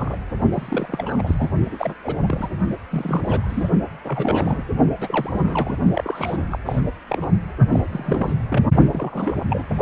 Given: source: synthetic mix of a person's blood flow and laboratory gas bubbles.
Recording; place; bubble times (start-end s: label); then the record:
Doppler ultrasound of blood flow; precordium
0.00-0.17 s: bubbles
0.53-1.50 s: bubbles
1.69-1.94 s: bubbles
2.03-2.15 s: bubbles
2.26-2.50 s: bubbles
2.92-3.69 s: bubbles
4.04-4.63 s: bubbles
5.00-5.81 s: bubbles
5.93-6.58 s: bubbles
6.66-6.81 s: bubbles
7.08-7.25 s: bubbles
7.70-7.84 s: bubbles
7.90-8.35 s: bubbles
8.49-8.65 s: bubbles
8.92-9.43 s: bubbles
9.50-9.64 s: bubbles
From the record:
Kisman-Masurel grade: 342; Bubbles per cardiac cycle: rolling drumbeat, 9 or more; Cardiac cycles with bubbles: 100%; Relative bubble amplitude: moderate (0.250 to 0.450); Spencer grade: 3 (all of the cardiac periods contain showers or single bubble signals, but not dominating or overriding the cardiac motion signals); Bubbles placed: only in the low amplitude regions of the cardiac cycle